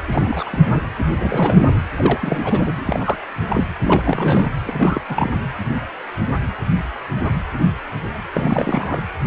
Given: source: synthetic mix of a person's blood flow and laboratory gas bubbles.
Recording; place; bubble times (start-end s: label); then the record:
Doppler ultrasound of blood flow; precordium
0.08-0.89 s: bubbles
1.17-1.73 s: bubbles
1.96-3.17 s: bubbles
3.50-3.67 s: bubbles
3.81-4.49 s: bubbles
4.65-5.01 s: bubbles
5.08-5.30 s: bubbles
8.33-9.01 s: bubbles
From the record:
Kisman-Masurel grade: 332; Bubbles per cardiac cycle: rolling drumbeat, 9 or more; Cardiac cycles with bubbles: 50 to 99%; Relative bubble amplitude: moderate (0.250 to 0.450); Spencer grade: 3 (all of the cardiac periods contain showers or single bubble signals, but not dominating or overriding the cardiac motion signals); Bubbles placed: anywhere in the cardiac cycle